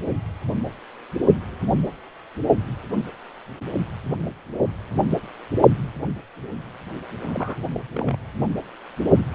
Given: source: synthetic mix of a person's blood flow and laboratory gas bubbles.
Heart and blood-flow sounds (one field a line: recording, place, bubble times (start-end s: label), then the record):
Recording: Doppler ultrasound of blood flow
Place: precordium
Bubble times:
7.20-7.64 s: bubbles
7.72-7.79 s: bubbles
7.95-8.17 s: bubbles
From the record:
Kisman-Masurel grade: 211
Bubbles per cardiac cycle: several, 3 to 8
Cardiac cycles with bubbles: 1 to 10%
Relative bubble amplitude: barely perceptible (0.100 to 0.250)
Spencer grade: 1 (occasional bubble signal discernible with the cardiac motion signal, with majority of cardiac periods free of bubbles)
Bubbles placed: only in the low amplitude regions of the cardiac cycle